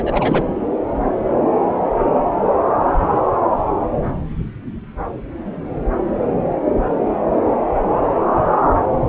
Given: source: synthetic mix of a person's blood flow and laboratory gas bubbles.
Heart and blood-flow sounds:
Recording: Doppler ultrasound of blood flow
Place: subclavian vein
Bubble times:
0.00-0.44 s: bubbles
From the record:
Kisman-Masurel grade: 212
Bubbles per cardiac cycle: several, 3 to 8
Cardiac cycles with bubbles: 1 to 10%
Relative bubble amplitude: moderate (0.250 to 0.450)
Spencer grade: 1 (occasional bubble signal discernible with the cardiac motion signal, with majority of cardiac periods free of bubbles)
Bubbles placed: anywhere in the cardiac cycle

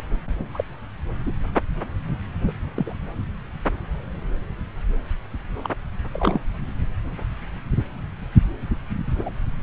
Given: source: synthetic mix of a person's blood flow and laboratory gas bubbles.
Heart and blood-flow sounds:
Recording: Doppler ultrasound of blood flow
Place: subclavian vein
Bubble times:
0.00-0.03 s: bubbles
0.39-0.46 s: bubbles
0.54-0.64 s: bubbles
1.26-1.32 s: bubbles
2.47-2.52 s: bubbles
2.75-2.95 s: bubbles
5.63-5.70 s: bubbles
6.13-6.40 s: bubbles
9.15-9.30 s: bubbles
From the record:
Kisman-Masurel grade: 232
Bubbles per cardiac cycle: several, 3 to 8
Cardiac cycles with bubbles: 50 to 99%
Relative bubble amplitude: moderate (0.250 to 0.450)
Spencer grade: 3 (all of the cardiac periods contain showers or single bubble signals, but not dominating or overriding the cardiac motion signals)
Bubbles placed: anywhere in the cardiac cycle

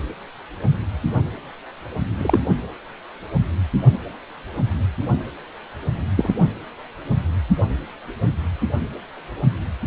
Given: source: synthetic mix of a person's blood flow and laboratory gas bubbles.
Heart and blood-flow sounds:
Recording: Doppler ultrasound of blood flow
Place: precordium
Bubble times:
2.17-2.40 s: bubbles
6.17-6.32 s: bubbles
From the record:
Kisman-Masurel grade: 123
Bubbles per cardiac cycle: 1 to 2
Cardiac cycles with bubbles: 10 to 50%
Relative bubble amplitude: loud (0.450 to 0.775)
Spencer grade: 2 (many but less than half of the cardiac periods contain bubble signals, singularly or in groups)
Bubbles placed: anywhere in the cardiac cycle

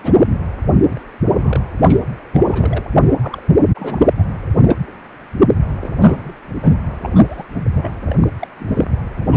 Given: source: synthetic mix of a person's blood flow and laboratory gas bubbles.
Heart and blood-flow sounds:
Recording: Doppler ultrasound of blood flow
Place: precordium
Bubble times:
0.03-0.38 s: bubbles
0.86-1.01 s: bubbles
1.25-1.64 s: bubbles
1.84-1.97 s: bubbles
2.33-2.83 s: bubbles
3.05-3.14 s: bubbles
3.21-3.42 s: bubbles
3.75-4.06 s: bubbles
4.18-4.23 s: bubbles
4.64-4.77 s: bubbles
4.88-4.92 s: bubbles
5.49-5.56 s: bubbles
5.81-5.89 s: bubbles
6.02-6.33 s: bubbles
6.44-6.75 s: bubbles
7.02-7.43 s: bubbles
7.54-7.67 s: bubbles
7.74-7.93 s: bubbles
8.09-8.16 s: bubbles
8.20-8.28 s: bubbles
8.39-8.48 s: bubbles
8.60-8.92 s: bubbles
9.15-9.36 s: bubbles
From the record:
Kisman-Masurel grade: 242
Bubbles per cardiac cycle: several, 3 to 8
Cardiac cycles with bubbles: 100%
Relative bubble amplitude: moderate (0.250 to 0.450)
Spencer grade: 3 (all of the cardiac periods contain showers or single bubble signals, but not dominating or overriding the cardiac motion signals)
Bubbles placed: anywhere in the cardiac cycle

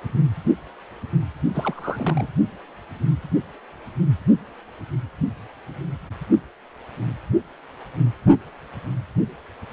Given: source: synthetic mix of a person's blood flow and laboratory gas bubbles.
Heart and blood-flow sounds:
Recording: Doppler ultrasound of blood flow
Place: precordium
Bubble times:
1.54-2.28 s: bubbles
From the record:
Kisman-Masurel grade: 211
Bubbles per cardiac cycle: several, 3 to 8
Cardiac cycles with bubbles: 1 to 10%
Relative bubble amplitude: barely perceptible (0.100 to 0.250)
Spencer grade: 1 (occasional bubble signal discernible with the cardiac motion signal, with majority of cardiac periods free of bubbles)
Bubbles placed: only in the low amplitude regions of the cardiac cycle

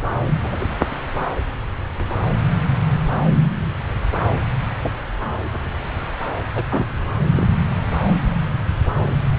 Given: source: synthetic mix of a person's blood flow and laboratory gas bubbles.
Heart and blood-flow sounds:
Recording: Doppler ultrasound of blood flow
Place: subclavian vein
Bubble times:
0.26-0.65 s: bubbles
4.83-4.92 s: bubbles
6.55-6.64 s: bubbles
6.70-6.86 s: bubbles
7.30-7.47 s: bubbles
From the record:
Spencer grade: 2 (many but less than half of the cardiac periods contain bubble signals, singularly or in groups)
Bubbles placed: anywhere in the cardiac cycle

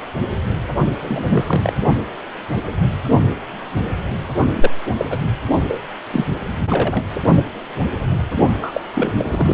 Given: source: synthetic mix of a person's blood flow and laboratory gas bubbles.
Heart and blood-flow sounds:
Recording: Doppler ultrasound of blood flow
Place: precordium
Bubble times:
1.02-1.25 s: bubbles
1.30-1.45 s: bubbles
1.47-1.73 s: bubbles
4.53-4.74 s: bubbles
4.98-5.06 s: bubbles
5.09-5.17 s: bubbles
5.67-5.81 s: bubbles
6.10-6.25 s: bubbles
6.69-7.04 s: bubbles
8.55-8.86 s: bubbles
8.95-9.14 s: bubbles
9.16-9.54 s: bubbles
From the record:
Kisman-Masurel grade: 233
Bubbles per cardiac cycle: several, 3 to 8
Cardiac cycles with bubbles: 50 to 99%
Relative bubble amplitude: loud (0.450 to 0.775)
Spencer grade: 3 (all of the cardiac periods contain showers or single bubble signals, but not dominating or overriding the cardiac motion signals)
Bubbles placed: only in the low amplitude regions of the cardiac cycle

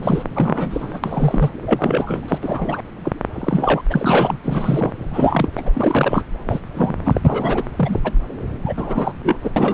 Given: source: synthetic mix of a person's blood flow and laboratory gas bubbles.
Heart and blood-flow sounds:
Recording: Doppler ultrasound of blood flow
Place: subclavian vein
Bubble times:
0.02-0.23 s: bubbles
0.35-1.00 s: bubbles
1.03-1.51 s: bubbles
1.66-2.21 s: bubbles
2.28-2.39 s: bubbles
2.42-2.82 s: bubbles
3.04-3.12 s: bubbles
3.35-3.82 s: bubbles
3.90-4.38 s: bubbles
4.43-4.93 s: bubbles
5.13-5.49 s: bubbles
5.57-5.71 s: bubbles
5.73-6.24 s: bubbles
6.49-6.60 s: bubbles
6.74-6.94 s: bubbles
7.04-7.63 s: bubbles
7.77-8.00 s: bubbles
8.04-8.11 s: bubbles
8.65-8.73 s: bubbles
8.76-9.12 s: bubbles
9.23-9.36 s: bubbles
9.43-9.51 s: bubbles
9.56-9.74 s: bubbles
From the record:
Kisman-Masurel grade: 243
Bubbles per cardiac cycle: several, 3 to 8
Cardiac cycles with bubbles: 100%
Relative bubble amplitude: loud (0.450 to 0.775)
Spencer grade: 3 (all of the cardiac periods contain showers or single bubble signals, but not dominating or overriding the cardiac motion signals)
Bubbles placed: anywhere in the cardiac cycle

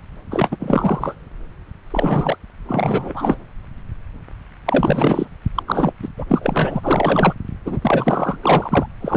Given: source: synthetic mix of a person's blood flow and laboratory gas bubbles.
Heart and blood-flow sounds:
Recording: Doppler ultrasound of blood flow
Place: subclavian vein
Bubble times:
0.30-0.57 s: bubbles
0.59-1.15 s: bubbles
1.90-2.37 s: bubbles
2.68-3.39 s: bubbles
4.66-5.28 s: bubbles
5.55-5.63 s: bubbles
5.67-5.93 s: bubbles
6.01-6.08 s: bubbles
6.18-6.24 s: bubbles
6.28-7.34 s: bubbles
7.65-7.79 s: bubbles
7.81-8.38 s: bubbles
8.41-8.86 s: bubbles
9.00-9.17 s: bubbles
From the record:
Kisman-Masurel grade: 333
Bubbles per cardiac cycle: rolling drumbeat, 9 or more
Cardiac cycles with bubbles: 50 to 99%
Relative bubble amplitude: loud (0.450 to 0.775)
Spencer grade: 3 (all of the cardiac periods contain showers or single bubble signals, but not dominating or overriding the cardiac motion signals)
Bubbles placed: anywhere in the cardiac cycle

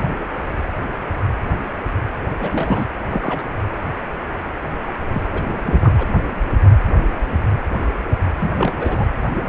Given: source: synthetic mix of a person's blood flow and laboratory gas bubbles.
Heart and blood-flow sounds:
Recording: Doppler ultrasound of blood flow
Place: precordium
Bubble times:
2.40-2.89 s: bubbles
3.08-3.47 s: bubbles
5.10-5.22 s: bubbles
5.33-5.42 s: bubbles
5.66-5.92 s: bubbles
5.97-6.06 s: bubbles
8.40-8.53 s: bubbles
8.56-8.73 s: bubbles
8.79-9.06 s: bubbles
From the record:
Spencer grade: 2 (many but less than half of the cardiac periods contain bubble signals, singularly or in groups)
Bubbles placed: anywhere in the cardiac cycle

